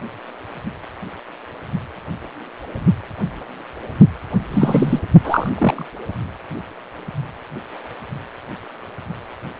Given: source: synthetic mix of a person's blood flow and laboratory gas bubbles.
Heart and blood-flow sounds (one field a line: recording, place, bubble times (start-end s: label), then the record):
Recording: Doppler ultrasound of blood flow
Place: precordium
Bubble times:
4.50-5.00 s: bubbles
5.24-5.50 s: bubbles
5.54-5.86 s: bubbles
From the record:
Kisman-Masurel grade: 223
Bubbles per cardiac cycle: several, 3 to 8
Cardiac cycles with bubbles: 10 to 50%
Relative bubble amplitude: loud (0.450 to 0.775)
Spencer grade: 2 (many but less than half of the cardiac periods contain bubble signals, singularly or in groups)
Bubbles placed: anywhere in the cardiac cycle